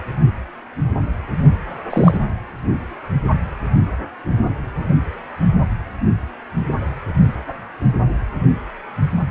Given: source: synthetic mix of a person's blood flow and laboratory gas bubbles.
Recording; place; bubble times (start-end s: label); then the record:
Doppler ultrasound of blood flow; precordium
1.90-2.17 s: bubbles
From the record:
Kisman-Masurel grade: 113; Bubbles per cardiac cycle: 1 to 2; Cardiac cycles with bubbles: 1 to 10%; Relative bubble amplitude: loud (0.450 to 0.775); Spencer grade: 1 (occasional bubble signal discernible with the cardiac motion signal, with majority of cardiac periods free of bubbles); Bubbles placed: anywhere in the cardiac cycle